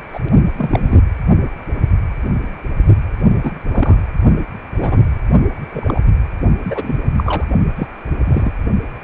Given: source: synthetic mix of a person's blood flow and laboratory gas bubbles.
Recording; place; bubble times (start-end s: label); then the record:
Doppler ultrasound of blood flow; precordium
0.13-0.20 s: bubbles
0.58-1.01 s: bubbles
3.43-3.60 s: bubbles
3.71-3.96 s: bubbles
4.78-5.04 s: bubbles
5.71-6.00 s: bubbles
6.63-6.98 s: bubbles
7.17-7.44 s: bubbles
7.76-7.87 s: bubbles
8.24-8.52 s: bubbles
From the record:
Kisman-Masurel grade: 233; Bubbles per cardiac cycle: several, 3 to 8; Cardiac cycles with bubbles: 50 to 99%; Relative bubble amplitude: loud (0.450 to 0.775); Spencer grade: 3 (all of the cardiac periods contain showers or single bubble signals, but not dominating or overriding the cardiac motion signals); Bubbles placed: only in the low amplitude regions of the cardiac cycle